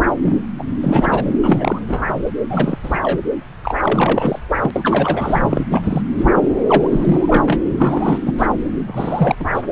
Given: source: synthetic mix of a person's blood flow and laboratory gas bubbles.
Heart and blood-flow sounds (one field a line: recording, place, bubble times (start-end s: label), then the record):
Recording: Doppler ultrasound of blood flow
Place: subclavian vein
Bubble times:
0.22-0.37 s: bubbles
0.58-0.63 s: bubbles
0.82-1.32 s: bubbles
1.44-1.79 s: bubbles
1.88-2.05 s: bubbles
2.08-2.13 s: bubbles
2.50-2.78 s: bubbles
2.82-2.98 s: bubbles
3.02-3.20 s: bubbles
3.63-3.74 s: bubbles
3.82-4.39 s: bubbles
4.62-4.71 s: bubbles
4.74-5.65 s: bubbles
5.71-6.02 s: bubbles
6.18-6.30 s: bubbles
6.36-6.48 s: bubbles
6.68-7.61 s: bubbles
7.70-8.18 s: bubbles
8.26-8.33 s: bubbles
8.38-8.46 s: bubbles
8.87-9.36 s: bubbles
9.39-9.46 s: bubbles
9.54-9.62 s: bubbles
From the record:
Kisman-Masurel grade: 342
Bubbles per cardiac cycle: rolling drumbeat, 9 or more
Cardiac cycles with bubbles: 100%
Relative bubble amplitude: moderate (0.250 to 0.450)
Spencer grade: 3 (all of the cardiac periods contain showers or single bubble signals, but not dominating or overriding the cardiac motion signals)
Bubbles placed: anywhere in the cardiac cycle